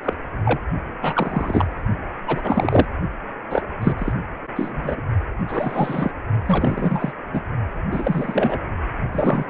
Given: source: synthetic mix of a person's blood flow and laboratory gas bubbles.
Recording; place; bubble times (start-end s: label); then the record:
Doppler ultrasound of blood flow; precordium
0.02-0.14 s: bubbles
0.45-0.60 s: bubbles
1.01-1.69 s: bubbles
2.26-2.86 s: bubbles
3.49-3.62 s: bubbles
3.81-3.95 s: bubbles
3.98-4.13 s: bubbles
4.55-5.04 s: bubbles
5.47-6.11 s: bubbles
6.46-7.12 s: bubbles
7.33-7.41 s: bubbles
7.91-8.60 s: bubbles
9.13-9.46 s: bubbles
From the record:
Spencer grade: 3 (all of the cardiac periods contain showers or single bubble signals, but not dominating or overriding the cardiac motion signals); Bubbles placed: only in the low amplitude regions of the cardiac cycle